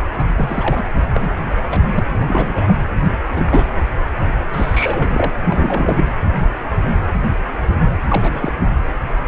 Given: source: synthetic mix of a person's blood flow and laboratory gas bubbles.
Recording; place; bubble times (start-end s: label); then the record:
Doppler ultrasound of blood flow; precordium
0.19-0.24 s: bubbles
0.38-0.87 s: bubbles
1.11-1.30 s: bubbles
1.70-1.79 s: bubbles
1.94-2.04 s: bubbles
2.28-2.75 s: bubbles
3.35-3.69 s: bubbles
4.52-5.31 s: bubbles
5.41-6.05 s: bubbles
8.08-8.53 s: bubbles
From the record:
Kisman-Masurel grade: 232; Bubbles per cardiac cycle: several, 3 to 8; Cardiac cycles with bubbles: 50 to 99%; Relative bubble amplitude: moderate (0.250 to 0.450); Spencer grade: 3 (all of the cardiac periods contain showers or single bubble signals, but not dominating or overriding the cardiac motion signals); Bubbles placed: anywhere in the cardiac cycle